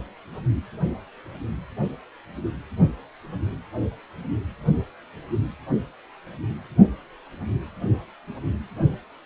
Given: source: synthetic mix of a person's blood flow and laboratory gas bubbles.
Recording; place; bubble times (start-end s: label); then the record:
Doppler ultrasound of blood flow; precordium
no bubbles
From the record:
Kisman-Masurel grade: 000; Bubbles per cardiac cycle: 0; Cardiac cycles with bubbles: 0%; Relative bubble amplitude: no bubbles discernible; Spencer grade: 0 (complete lack of bubble signals)